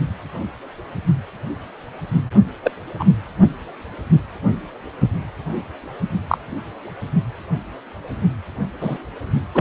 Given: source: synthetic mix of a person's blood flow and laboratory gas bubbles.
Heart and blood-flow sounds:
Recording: Doppler ultrasound of blood flow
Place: precordium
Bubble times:
2.64-2.72 s: bubbles
2.99-3.05 s: bubbles
6.29-6.38 s: bubbles
8.81-8.98 s: bubbles
9.54-9.61 s: bubbles
From the record:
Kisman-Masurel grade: 123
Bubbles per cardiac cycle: 1 to 2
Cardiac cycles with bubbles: 10 to 50%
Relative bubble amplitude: loud (0.450 to 0.775)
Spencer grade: 2 (many but less than half of the cardiac periods contain bubble signals, singularly or in groups)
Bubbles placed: only in the low amplitude regions of the cardiac cycle

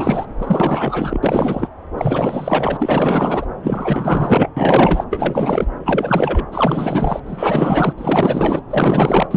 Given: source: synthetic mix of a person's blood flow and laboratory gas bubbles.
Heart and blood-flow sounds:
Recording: Doppler ultrasound of blood flow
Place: subclavian vein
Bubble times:
0.00-0.26 s: bubbles
0.38-1.19 s: bubbles
1.23-1.68 s: bubbles
1.97-3.46 s: bubbles
3.62-4.50 s: bubbles
4.56-5.04 s: bubbles
5.10-5.65 s: bubbles
5.85-6.46 s: bubbles
6.51-7.20 s: bubbles
7.26-7.93 s: bubbles
7.98-8.62 s: bubbles
8.70-9.27 s: bubbles
9.31-9.37 s: bubbles
From the record:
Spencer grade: 4 (maximum detectable bubble signal sounding continuously throughout systole and diastole of every cardiac period, and overriding the amplitude of the normal cardiac signals)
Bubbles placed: anywhere in the cardiac cycle

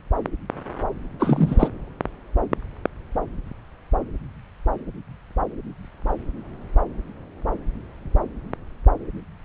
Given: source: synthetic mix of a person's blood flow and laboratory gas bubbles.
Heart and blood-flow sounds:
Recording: Doppler ultrasound of blood flow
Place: subclavian vein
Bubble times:
1.20-1.68 s: bubbles
From the record:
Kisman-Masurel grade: 213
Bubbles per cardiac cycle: several, 3 to 8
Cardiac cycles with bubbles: 1 to 10%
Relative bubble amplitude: loud (0.450 to 0.775)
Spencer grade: 1 (occasional bubble signal discernible with the cardiac motion signal, with majority of cardiac periods free of bubbles)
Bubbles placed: anywhere in the cardiac cycle

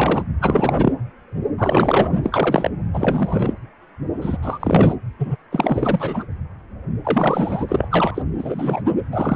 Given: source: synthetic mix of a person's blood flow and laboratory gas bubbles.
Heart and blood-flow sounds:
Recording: Doppler ultrasound of blood flow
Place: precordium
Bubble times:
0.00-0.25 s: bubbles
0.41-0.93 s: bubbles
1.57-2.18 s: bubbles
2.23-2.70 s: bubbles
2.94-3.54 s: bubbles
4.21-4.37 s: bubbles
4.42-4.96 s: bubbles
5.19-5.36 s: bubbles
5.52-6.26 s: bubbles
7.04-7.65 s: bubbles
7.68-8.22 s: bubbles
8.38-8.82 s: bubbles
9.12-9.36 s: bubbles
From the record:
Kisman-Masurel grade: 333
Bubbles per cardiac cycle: rolling drumbeat, 9 or more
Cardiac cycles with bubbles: 50 to 99%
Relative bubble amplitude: loud (0.450 to 0.775)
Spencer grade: 3 (all of the cardiac periods contain showers or single bubble signals, but not dominating or overriding the cardiac motion signals)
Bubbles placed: anywhere in the cardiac cycle

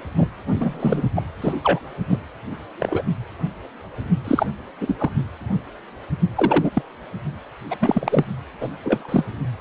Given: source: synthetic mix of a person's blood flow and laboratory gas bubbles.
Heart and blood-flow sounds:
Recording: Doppler ultrasound of blood flow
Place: precordium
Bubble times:
0.16-0.28 s: bubbles
0.59-1.03 s: bubbles
1.16-1.22 s: bubbles
1.42-1.53 s: bubbles
1.63-1.79 s: bubbles
2.08-2.19 s: bubbles
2.80-3.02 s: bubbles
4.24-4.46 s: bubbles
4.81-4.96 s: bubbles
4.98-5.10 s: bubbles
6.37-6.70 s: bubbles
6.74-6.82 s: bubbles
7.70-7.76 s: bubbles
7.81-8.25 s: bubbles
8.61-8.69 s: bubbles
8.83-9.24 s: bubbles
From the record:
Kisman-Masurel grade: 232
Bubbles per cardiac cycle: several, 3 to 8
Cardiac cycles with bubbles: 50 to 99%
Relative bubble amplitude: moderate (0.250 to 0.450)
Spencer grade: 3 (all of the cardiac periods contain showers or single bubble signals, but not dominating or overriding the cardiac motion signals)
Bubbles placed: only in the low amplitude regions of the cardiac cycle

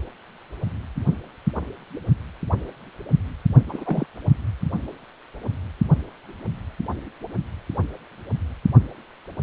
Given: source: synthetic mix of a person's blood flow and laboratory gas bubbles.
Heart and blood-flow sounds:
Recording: Doppler ultrasound of blood flow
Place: precordium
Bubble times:
3.69-4.06 s: bubbles
From the record:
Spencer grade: 2 (many but less than half of the cardiac periods contain bubble signals, singularly or in groups)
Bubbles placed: only in the low amplitude regions of the cardiac cycle

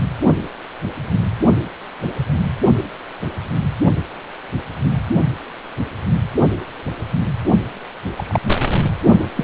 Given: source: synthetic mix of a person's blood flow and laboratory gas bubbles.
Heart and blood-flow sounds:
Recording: Doppler ultrasound of blood flow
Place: precordium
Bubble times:
8.16-8.40 s: bubbles
9.36-9.44 s: bubbles
From the record:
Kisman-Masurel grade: 122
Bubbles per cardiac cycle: 1 to 2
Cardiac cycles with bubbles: 10 to 50%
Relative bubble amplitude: moderate (0.250 to 0.450)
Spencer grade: 2 (many but less than half of the cardiac periods contain bubble signals, singularly or in groups)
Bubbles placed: anywhere in the cardiac cycle

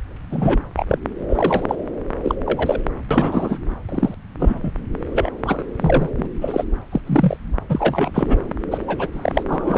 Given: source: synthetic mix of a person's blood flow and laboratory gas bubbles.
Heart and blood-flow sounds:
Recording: Doppler ultrasound of blood flow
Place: subclavian vein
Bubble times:
0.31-0.58 s: bubbles
0.77-0.85 s: bubbles
0.88-0.98 s: bubbles
1.29-1.66 s: bubbles
1.68-1.75 s: bubbles
2.24-2.35 s: bubbles
2.46-2.79 s: bubbles
3.10-3.58 s: bubbles
3.89-4.15 s: bubbles
4.40-4.73 s: bubbles
5.12-5.30 s: bubbles
5.44-5.65 s: bubbles
5.80-6.09 s: bubbles
6.17-6.29 s: bubbles
6.41-6.65 s: bubbles
6.92-7.01 s: bubbles
7.06-7.37 s: bubbles
7.69-8.37 s: bubbles
8.71-8.79 s: bubbles
8.87-9.08 s: bubbles
9.12-9.44 s: bubbles
9.48-9.78 s: bubbles
From the record:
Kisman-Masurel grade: 243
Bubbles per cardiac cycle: several, 3 to 8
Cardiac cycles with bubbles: 100%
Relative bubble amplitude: loud (0.450 to 0.775)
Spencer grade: 3 (all of the cardiac periods contain showers or single bubble signals, but not dominating or overriding the cardiac motion signals)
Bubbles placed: anywhere in the cardiac cycle

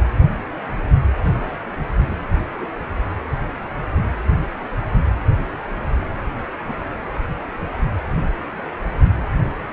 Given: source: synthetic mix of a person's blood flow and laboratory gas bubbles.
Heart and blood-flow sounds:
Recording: Doppler ultrasound of blood flow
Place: precordium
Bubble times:
1.25-1.51 s: bubbles
2.60-2.67 s: bubbles
6.67-6.73 s: bubbles
From the record:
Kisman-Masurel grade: 121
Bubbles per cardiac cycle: 1 to 2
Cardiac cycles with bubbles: 10 to 50%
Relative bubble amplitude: barely perceptible (0.100 to 0.250)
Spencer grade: 2 (many but less than half of the cardiac periods contain bubble signals, singularly or in groups)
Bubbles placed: anywhere in the cardiac cycle

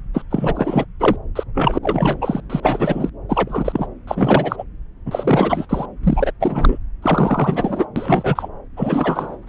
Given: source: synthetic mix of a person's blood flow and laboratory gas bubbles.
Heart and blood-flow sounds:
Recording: Doppler ultrasound of blood flow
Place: subclavian vein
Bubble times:
0.14-0.23 s: bubbles
0.30-0.86 s: bubbles
0.99-1.16 s: bubbles
1.35-1.44 s: bubbles
1.54-1.79 s: bubbles
1.83-2.19 s: bubbles
2.21-2.41 s: bubbles
2.50-3.10 s: bubbles
3.29-3.87 s: bubbles
4.07-4.64 s: bubbles
5.05-5.67 s: bubbles
5.69-5.86 s: bubbles
6.03-6.31 s: bubbles
6.40-6.78 s: bubbles
7.02-7.85 s: bubbles
7.96-8.48 s: bubbles
8.77-9.36 s: bubbles
From the record:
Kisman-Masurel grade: 343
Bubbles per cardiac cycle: rolling drumbeat, 9 or more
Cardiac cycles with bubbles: 100%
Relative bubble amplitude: loud (0.450 to 0.775)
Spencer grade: 3 (all of the cardiac periods contain showers or single bubble signals, but not dominating or overriding the cardiac motion signals)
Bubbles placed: anywhere in the cardiac cycle

